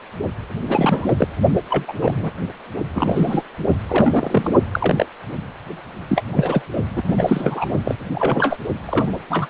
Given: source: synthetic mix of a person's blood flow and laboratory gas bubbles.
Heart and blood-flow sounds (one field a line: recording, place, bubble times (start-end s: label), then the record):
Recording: Doppler ultrasound of blood flow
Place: precordium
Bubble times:
0.68-1.12 s: bubbles
1.17-1.27 s: bubbles
1.69-1.93 s: bubbles
2.02-2.31 s: bubbles
2.95-3.43 s: bubbles
3.88-4.51 s: bubbles
4.71-5.06 s: bubbles
6.09-6.23 s: bubbles
6.32-6.62 s: bubbles
6.96-7.03 s: bubbles
7.08-7.65 s: bubbles
7.84-7.96 s: bubbles
8.14-8.57 s: bubbles
8.86-9.12 s: bubbles
9.29-9.50 s: bubbles
From the record:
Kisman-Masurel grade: 243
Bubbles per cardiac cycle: several, 3 to 8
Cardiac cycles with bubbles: 100%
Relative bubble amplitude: loud (0.450 to 0.775)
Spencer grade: 3 (all of the cardiac periods contain showers or single bubble signals, but not dominating or overriding the cardiac motion signals)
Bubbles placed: only in the low amplitude regions of the cardiac cycle